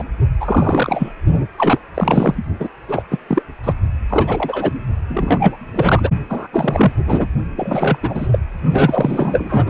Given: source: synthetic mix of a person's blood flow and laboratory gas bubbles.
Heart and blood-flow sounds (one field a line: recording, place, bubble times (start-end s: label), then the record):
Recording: Doppler ultrasound of blood flow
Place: precordium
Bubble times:
0.00-0.04 s: bubbles
0.40-1.12 s: bubbles
1.58-1.79 s: bubbles
1.94-2.34 s: bubbles
2.59-2.69 s: bubbles
2.88-3.02 s: bubbles
3.10-3.18 s: bubbles
3.28-3.43 s: bubbles
3.63-3.73 s: bubbles
4.08-4.73 s: bubbles
5.08-5.57 s: bubbles
5.74-6.10 s: bubbles
6.29-6.47 s: bubbles
6.53-6.92 s: bubbles
7.06-7.27 s: bubbles
7.55-7.98 s: bubbles
8.02-8.28 s: bubbles
8.32-8.39 s: bubbles
8.72-9.70 s: bubbles
From the record:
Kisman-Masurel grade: 333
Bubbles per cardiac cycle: rolling drumbeat, 9 or more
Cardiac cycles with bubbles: 50 to 99%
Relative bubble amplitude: loud (0.450 to 0.775)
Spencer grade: 3 (all of the cardiac periods contain showers or single bubble signals, but not dominating or overriding the cardiac motion signals)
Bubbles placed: only in the low amplitude regions of the cardiac cycle